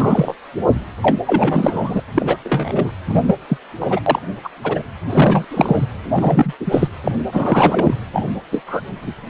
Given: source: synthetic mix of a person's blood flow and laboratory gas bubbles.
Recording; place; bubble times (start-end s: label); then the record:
Doppler ultrasound of blood flow; precordium
0.00-0.36 s: bubbles
1.02-1.18 s: bubbles
1.26-2.02 s: bubbles
2.15-2.36 s: bubbles
2.45-2.91 s: bubbles
3.06-3.35 s: bubbles
3.49-3.57 s: bubbles
3.80-4.00 s: bubbles
4.06-4.19 s: bubbles
4.43-4.50 s: bubbles
4.63-4.83 s: bubbles
5.09-5.45 s: bubbles
5.51-5.85 s: bubbles
6.13-6.54 s: bubbles
6.60-6.88 s: bubbles
7.04-7.12 s: bubbles
7.32-7.94 s: bubbles
8.13-8.24 s: bubbles
8.52-8.61 s: bubbles
8.67-8.81 s: bubbles
9.03-9.13 s: bubbles
From the record:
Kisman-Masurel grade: 243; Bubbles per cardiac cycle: several, 3 to 8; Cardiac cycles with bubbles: 100%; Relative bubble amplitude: loud (0.450 to 0.775); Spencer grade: 3 (all of the cardiac periods contain showers or single bubble signals, but not dominating or overriding the cardiac motion signals); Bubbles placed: anywhere in the cardiac cycle